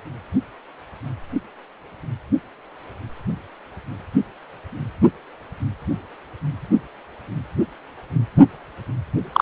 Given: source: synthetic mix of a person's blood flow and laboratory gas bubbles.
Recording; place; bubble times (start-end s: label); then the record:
Doppler ultrasound of blood flow; precordium
9.32-9.42 s: bubbles
From the record:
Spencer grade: 1 (occasional bubble signal discernible with the cardiac motion signal, with majority of cardiac periods free of bubbles); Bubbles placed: anywhere in the cardiac cycle